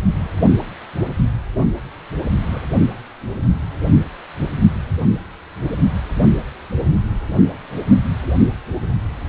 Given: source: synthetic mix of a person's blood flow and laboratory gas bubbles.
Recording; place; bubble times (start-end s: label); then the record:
Doppler ultrasound of blood flow; precordium
2.52-2.62 s: bubbles
4.93-5.20 s: bubbles
From the record:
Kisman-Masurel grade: 121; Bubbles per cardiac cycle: 1 to 2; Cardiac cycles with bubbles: 10 to 50%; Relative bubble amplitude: barely perceptible (0.100 to 0.250); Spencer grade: 2 (many but less than half of the cardiac periods contain bubble signals, singularly or in groups); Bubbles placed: only in the low amplitude regions of the cardiac cycle